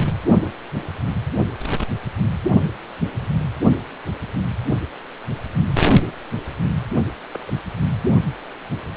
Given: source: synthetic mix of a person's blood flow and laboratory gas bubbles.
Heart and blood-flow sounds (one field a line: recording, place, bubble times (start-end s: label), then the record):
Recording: Doppler ultrasound of blood flow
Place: precordium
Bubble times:
7.31-7.40 s: bubbles
7.47-7.52 s: bubbles
From the record:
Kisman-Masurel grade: 121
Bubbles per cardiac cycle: 1 to 2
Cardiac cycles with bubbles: 10 to 50%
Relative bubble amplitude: barely perceptible (0.100 to 0.250)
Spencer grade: 2 (many but less than half of the cardiac periods contain bubble signals, singularly or in groups)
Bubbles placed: anywhere in the cardiac cycle